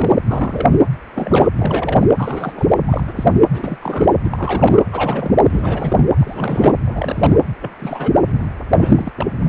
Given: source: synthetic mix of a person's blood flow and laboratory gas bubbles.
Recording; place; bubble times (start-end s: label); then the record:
Doppler ultrasound of blood flow; precordium
0.00-0.15 s: bubbles
0.26-0.76 s: bubbles
1.15-1.48 s: bubbles
1.58-2.09 s: bubbles
2.17-2.70 s: bubbles
2.87-3.04 s: bubbles
3.07-3.13 s: bubbles
3.16-3.32 s: bubbles
3.51-3.77 s: bubbles
3.81-4.14 s: bubbles
4.24-4.82 s: bubbles
4.92-5.37 s: bubbles
5.49-6.04 s: bubbles
6.17-6.77 s: bubbles
6.86-7.37 s: bubbles
7.61-7.71 s: bubbles
7.79-8.21 s: bubbles
8.25-8.46 s: bubbles
8.70-9.12 s: bubbles
9.15-9.26 s: bubbles
9.44-9.49 s: bubbles
From the record:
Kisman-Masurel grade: 342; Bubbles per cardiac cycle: rolling drumbeat, 9 or more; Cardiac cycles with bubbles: 100%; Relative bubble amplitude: moderate (0.250 to 0.450); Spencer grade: 3 (all of the cardiac periods contain showers or single bubble signals, but not dominating or overriding the cardiac motion signals); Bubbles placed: anywhere in the cardiac cycle